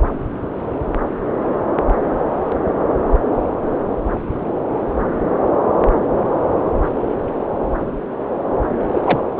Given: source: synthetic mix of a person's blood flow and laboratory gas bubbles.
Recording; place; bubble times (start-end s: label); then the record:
Doppler ultrasound of blood flow; subclavian vein
8.94-9.01 s: bubbles
9.04-9.19 s: bubbles
9.37-9.39 s: bubbles
From the record:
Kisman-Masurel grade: 212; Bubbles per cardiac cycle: several, 3 to 8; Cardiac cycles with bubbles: 1 to 10%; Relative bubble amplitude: moderate (0.250 to 0.450); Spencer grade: 1 (occasional bubble signal discernible with the cardiac motion signal, with majority of cardiac periods free of bubbles); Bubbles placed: anywhere in the cardiac cycle